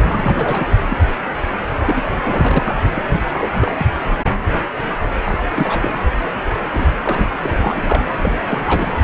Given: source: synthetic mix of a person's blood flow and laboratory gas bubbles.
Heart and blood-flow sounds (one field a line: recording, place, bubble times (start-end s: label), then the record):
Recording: Doppler ultrasound of blood flow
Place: precordium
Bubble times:
0.03-0.76 s: bubbles
0.89-0.97 s: bubbles
1.77-2.77 s: bubbles
2.94-3.02 s: bubbles
3.12-3.19 s: bubbles
3.29-3.50 s: bubbles
3.54-3.87 s: bubbles
5.25-5.38 s: bubbles
5.53-5.94 s: bubbles
6.72-6.87 s: bubbles
7.01-7.34 s: bubbles
7.43-8.05 s: bubbles
8.21-8.33 s: bubbles
8.45-8.96 s: bubbles
From the record:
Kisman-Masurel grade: 332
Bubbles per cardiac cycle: rolling drumbeat, 9 or more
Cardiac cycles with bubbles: 50 to 99%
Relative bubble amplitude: moderate (0.250 to 0.450)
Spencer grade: 3 (all of the cardiac periods contain showers or single bubble signals, but not dominating or overriding the cardiac motion signals)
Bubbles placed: anywhere in the cardiac cycle